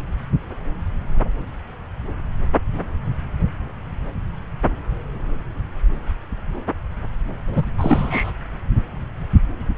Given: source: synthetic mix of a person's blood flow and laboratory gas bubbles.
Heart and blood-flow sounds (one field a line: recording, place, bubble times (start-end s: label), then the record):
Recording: Doppler ultrasound of blood flow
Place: subclavian vein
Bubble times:
7.46-7.65 s: bubbles
7.78-8.32 s: bubbles
From the record:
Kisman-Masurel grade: 212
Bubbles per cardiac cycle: several, 3 to 8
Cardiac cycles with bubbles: 1 to 10%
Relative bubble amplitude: moderate (0.250 to 0.450)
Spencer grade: 1 (occasional bubble signal discernible with the cardiac motion signal, with majority of cardiac periods free of bubbles)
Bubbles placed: anywhere in the cardiac cycle